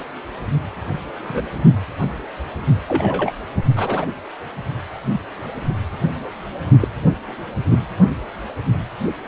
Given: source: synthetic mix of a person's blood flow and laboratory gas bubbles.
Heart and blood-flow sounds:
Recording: Doppler ultrasound of blood flow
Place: precordium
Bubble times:
1.24-1.48 s: bubbles
2.88-3.32 s: bubbles
3.76-4.05 s: bubbles
5.04-5.21 s: bubbles
6.80-6.88 s: bubbles
7.70-7.79 s: bubbles
From the record:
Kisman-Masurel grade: 122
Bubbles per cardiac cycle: 1 to 2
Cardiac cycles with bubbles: 10 to 50%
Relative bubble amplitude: moderate (0.250 to 0.450)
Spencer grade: 2 (many but less than half of the cardiac periods contain bubble signals, singularly or in groups)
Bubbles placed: only in the low amplitude regions of the cardiac cycle

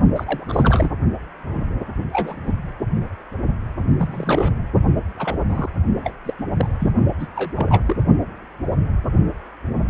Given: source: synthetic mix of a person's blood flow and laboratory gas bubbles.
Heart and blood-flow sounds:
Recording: Doppler ultrasound of blood flow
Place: precordium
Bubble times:
0.00-0.02 s: bubbles
0.15-0.90 s: bubbles
2.12-2.53 s: bubbles
3.98-4.52 s: bubbles
5.17-5.37 s: bubbles
5.48-5.69 s: bubbles
6.04-6.13 s: bubbles
6.25-6.33 s: bubbles
6.56-6.67 s: bubbles
6.80-6.91 s: bubbles
7.19-7.27 s: bubbles
7.35-7.52 s: bubbles
7.56-7.81 s: bubbles
7.85-7.97 s: bubbles
From the record:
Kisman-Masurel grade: 232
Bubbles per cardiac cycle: several, 3 to 8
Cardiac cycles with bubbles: 50 to 99%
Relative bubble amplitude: moderate (0.250 to 0.450)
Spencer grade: 3 (all of the cardiac periods contain showers or single bubble signals, but not dominating or overriding the cardiac motion signals)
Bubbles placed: only in the low amplitude regions of the cardiac cycle

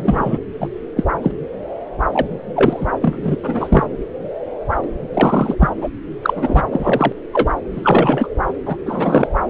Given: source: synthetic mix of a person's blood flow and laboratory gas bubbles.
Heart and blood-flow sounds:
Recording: Doppler ultrasound of blood flow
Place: subclavian vein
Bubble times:
0.00-0.39 s: bubbles
0.60-0.68 s: bubbles
0.96-1.04 s: bubbles
1.22-1.31 s: bubbles
2.13-2.27 s: bubbles
2.56-2.86 s: bubbles
3.02-3.37 s: bubbles
3.43-3.84 s: bubbles
4.83-4.93 s: bubbles
5.13-5.56 s: bubbles
5.59-5.69 s: bubbles
5.80-5.89 s: bubbles
6.22-6.63 s: bubbles
6.72-7.12 s: bubbles
7.33-7.50 s: bubbles
7.71-8.29 s: bubbles
8.65-8.77 s: bubbles
8.86-9.28 s: bubbles
From the record:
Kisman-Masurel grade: 233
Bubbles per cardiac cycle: several, 3 to 8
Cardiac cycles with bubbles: 50 to 99%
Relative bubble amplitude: loud (0.450 to 0.775)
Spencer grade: 3 (all of the cardiac periods contain showers or single bubble signals, but not dominating or overriding the cardiac motion signals)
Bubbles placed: anywhere in the cardiac cycle

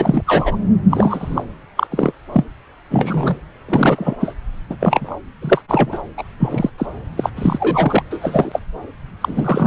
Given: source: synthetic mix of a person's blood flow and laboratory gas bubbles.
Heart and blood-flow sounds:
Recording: Doppler ultrasound of blood flow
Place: subclavian vein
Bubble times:
0.00-0.22 s: bubbles
0.26-0.57 s: bubbles
0.90-1.44 s: bubbles
1.77-1.87 s: bubbles
1.91-2.12 s: bubbles
2.32-2.44 s: bubbles
2.90-3.36 s: bubbles
3.68-4.17 s: bubbles
4.20-4.34 s: bubbles
4.70-4.77 s: bubbles
4.79-5.16 s: bubbles
5.42-5.62 s: bubbles
5.68-5.99 s: bubbles
6.17-6.24 s: bubbles
6.39-6.70 s: bubbles
6.78-6.86 s: bubbles
7.17-7.29 s: bubbles
7.36-8.03 s: bubbles
8.10-8.60 s: bubbles
9.21-9.66 s: bubbles
From the record:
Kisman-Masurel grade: 233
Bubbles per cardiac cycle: several, 3 to 8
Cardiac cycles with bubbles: 50 to 99%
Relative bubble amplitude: loud (0.450 to 0.775)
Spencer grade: 3 (all of the cardiac periods contain showers or single bubble signals, but not dominating or overriding the cardiac motion signals)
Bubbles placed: anywhere in the cardiac cycle

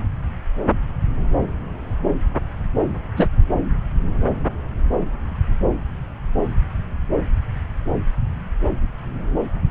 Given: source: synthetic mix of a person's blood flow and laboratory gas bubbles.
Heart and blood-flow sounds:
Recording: Doppler ultrasound of blood flow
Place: subclavian vein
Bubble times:
3.16-3.28 s: bubbles
From the record:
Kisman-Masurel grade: 113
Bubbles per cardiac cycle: 1 to 2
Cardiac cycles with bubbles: 1 to 10%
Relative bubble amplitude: loud (0.450 to 0.775)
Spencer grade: 1 (occasional bubble signal discernible with the cardiac motion signal, with majority of cardiac periods free of bubbles)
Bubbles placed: anywhere in the cardiac cycle

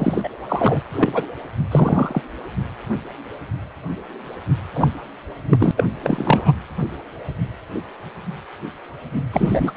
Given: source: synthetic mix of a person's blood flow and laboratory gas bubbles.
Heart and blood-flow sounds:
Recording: Doppler ultrasound of blood flow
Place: precordium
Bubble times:
0.00-0.29 s: bubbles
0.48-0.82 s: bubbles
0.93-1.26 s: bubbles
1.71-2.22 s: bubbles
4.75-4.96 s: bubbles
5.50-5.71 s: bubbles
5.77-5.84 s: bubbles
6.02-6.52 s: bubbles
9.33-9.71 s: bubbles
From the record:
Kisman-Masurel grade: 233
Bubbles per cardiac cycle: several, 3 to 8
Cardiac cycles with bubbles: 50 to 99%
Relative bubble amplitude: loud (0.450 to 0.775)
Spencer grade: 3 (all of the cardiac periods contain showers or single bubble signals, but not dominating or overriding the cardiac motion signals)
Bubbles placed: anywhere in the cardiac cycle

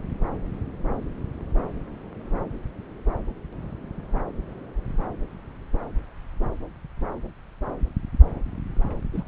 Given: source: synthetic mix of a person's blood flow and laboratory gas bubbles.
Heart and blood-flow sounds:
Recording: Doppler ultrasound of blood flow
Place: subclavian vein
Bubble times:
9.13-9.22 s: bubbles
From the record:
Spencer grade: 1 (occasional bubble signal discernible with the cardiac motion signal, with majority of cardiac periods free of bubbles)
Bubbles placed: anywhere in the cardiac cycle

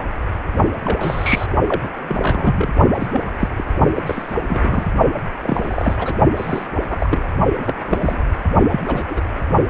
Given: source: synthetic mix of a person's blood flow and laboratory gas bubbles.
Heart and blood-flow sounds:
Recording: Doppler ultrasound of blood flow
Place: precordium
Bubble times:
0.00-0.05 s: bubbles
0.85-1.46 s: bubbles
1.68-1.89 s: bubbles
2.07-2.73 s: bubbles
2.96-3.08 s: bubbles
3.12-3.22 s: bubbles
3.27-3.32 s: bubbles
3.40-3.49 s: bubbles
3.56-3.64 s: bubbles
3.96-4.03 s: bubbles
4.06-4.34 s: bubbles
4.48-4.86 s: bubbles
5.42-6.17 s: bubbles
6.36-6.67 s: bubbles
6.90-7.29 s: bubbles
7.59-7.75 s: bubbles
7.84-8.23 s: bubbles
8.70-8.80 s: bubbles
8.88-9.06 s: bubbles
9.10-9.21 s: bubbles
From the record:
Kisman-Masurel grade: 242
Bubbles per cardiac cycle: several, 3 to 8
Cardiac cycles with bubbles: 100%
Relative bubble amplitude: moderate (0.250 to 0.450)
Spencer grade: 3 (all of the cardiac periods contain showers or single bubble signals, but not dominating or overriding the cardiac motion signals)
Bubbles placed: only in the low amplitude regions of the cardiac cycle

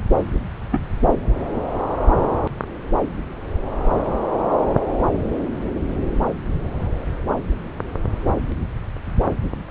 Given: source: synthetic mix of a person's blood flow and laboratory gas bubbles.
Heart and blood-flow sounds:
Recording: Doppler ultrasound of blood flow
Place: subclavian vein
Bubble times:
0.72-0.78 s: bubbles
From the record:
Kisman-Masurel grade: 113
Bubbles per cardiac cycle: 1 to 2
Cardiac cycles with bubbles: 1 to 10%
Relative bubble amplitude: loud (0.450 to 0.775)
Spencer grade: 1 (occasional bubble signal discernible with the cardiac motion signal, with majority of cardiac periods free of bubbles)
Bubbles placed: anywhere in the cardiac cycle

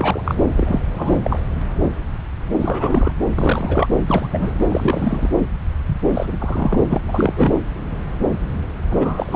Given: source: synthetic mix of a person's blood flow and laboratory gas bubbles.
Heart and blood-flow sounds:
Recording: Doppler ultrasound of blood flow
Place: subclavian vein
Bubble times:
0.00-0.21 s: bubbles
0.24-0.35 s: bubbles
0.57-0.79 s: bubbles
0.94-1.19 s: bubbles
1.22-1.40 s: bubbles
2.58-3.12 s: bubbles
3.35-3.87 s: bubbles
4.06-4.29 s: bubbles
4.31-4.59 s: bubbles
4.67-5.30 s: bubbles
6.13-6.84 s: bubbles
6.89-6.98 s: bubbles
7.07-7.59 s: bubbles
8.90-9.36 s: bubbles
From the record:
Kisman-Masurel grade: 332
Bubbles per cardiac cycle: rolling drumbeat, 9 or more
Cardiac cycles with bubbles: 50 to 99%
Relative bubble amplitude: moderate (0.250 to 0.450)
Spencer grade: 3 (all of the cardiac periods contain showers or single bubble signals, but not dominating or overriding the cardiac motion signals)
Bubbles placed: anywhere in the cardiac cycle

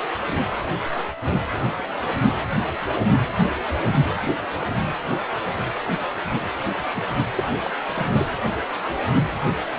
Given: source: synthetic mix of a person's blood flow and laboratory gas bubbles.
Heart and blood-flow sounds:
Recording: Doppler ultrasound of blood flow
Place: precordium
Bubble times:
6.94-7.03 s: bubbles
7.36-7.44 s: bubbles
7.65-7.71 s: bubbles
7.96-8.08 s: bubbles
8.19-8.26 s: bubbles
From the record:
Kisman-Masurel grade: 211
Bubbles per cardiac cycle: several, 3 to 8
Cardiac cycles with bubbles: 1 to 10%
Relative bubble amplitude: barely perceptible (0.100 to 0.250)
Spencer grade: 1 (occasional bubble signal discernible with the cardiac motion signal, with majority of cardiac periods free of bubbles)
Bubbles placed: anywhere in the cardiac cycle

